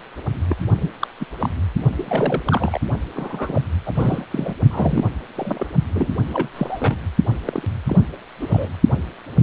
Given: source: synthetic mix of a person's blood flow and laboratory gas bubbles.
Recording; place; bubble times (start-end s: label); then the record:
Doppler ultrasound of blood flow; precordium
0.49-0.56 s: bubbles
0.81-0.90 s: bubbles
0.99-1.07 s: bubbles
1.20-1.25 s: bubbles
1.40-1.49 s: bubbles
1.98-2.42 s: bubbles
2.46-2.81 s: bubbles
3.14-3.61 s: bubbles
3.86-4.25 s: bubbles
4.31-4.53 s: bubbles
4.70-5.09 s: bubbles
5.35-5.67 s: bubbles
5.95-6.12 s: bubbles
6.33-6.48 s: bubbles
6.54-6.97 s: bubbles
7.47-7.68 s: bubbles
7.86-7.97 s: bubbles
8.39-8.70 s: bubbles
From the record:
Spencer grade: 3 (all of the cardiac periods contain showers or single bubble signals, but not dominating or overriding the cardiac motion signals); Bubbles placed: only in the low amplitude regions of the cardiac cycle